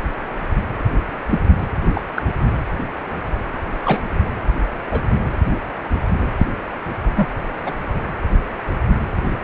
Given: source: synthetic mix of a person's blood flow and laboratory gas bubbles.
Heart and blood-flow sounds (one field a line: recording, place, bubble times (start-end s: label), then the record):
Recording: Doppler ultrasound of blood flow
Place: precordium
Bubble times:
1.29-1.39 s: bubbles
1.94-2.01 s: bubbles
2.17-2.24 s: bubbles
3.85-4.05 s: bubbles
4.91-5.00 s: bubbles
6.38-6.46 s: bubbles
7.16-7.25 s: bubbles
7.65-7.72 s: bubbles
From the record:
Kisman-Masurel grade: 122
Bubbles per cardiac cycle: 1 to 2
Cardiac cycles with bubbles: 10 to 50%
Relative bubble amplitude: moderate (0.250 to 0.450)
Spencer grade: 2 (many but less than half of the cardiac periods contain bubble signals, singularly or in groups)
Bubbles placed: anywhere in the cardiac cycle